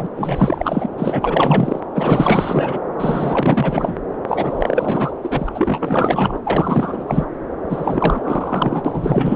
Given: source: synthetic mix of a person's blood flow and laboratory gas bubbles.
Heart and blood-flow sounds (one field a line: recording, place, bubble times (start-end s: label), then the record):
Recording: Doppler ultrasound of blood flow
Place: subclavian vein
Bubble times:
0.00-0.07 s: bubbles
0.14-0.90 s: bubbles
0.97-1.80 s: bubbles
1.94-2.79 s: bubbles
2.98-3.97 s: bubbles
4.28-5.12 s: bubbles
5.22-5.49 s: bubbles
5.54-6.38 s: bubbles
6.44-7.27 s: bubbles
7.69-9.36 s: bubbles
From the record:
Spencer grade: 4 (maximum detectable bubble signal sounding continuously throughout systole and diastole of every cardiac period, and overriding the amplitude of the normal cardiac signals)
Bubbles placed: anywhere in the cardiac cycle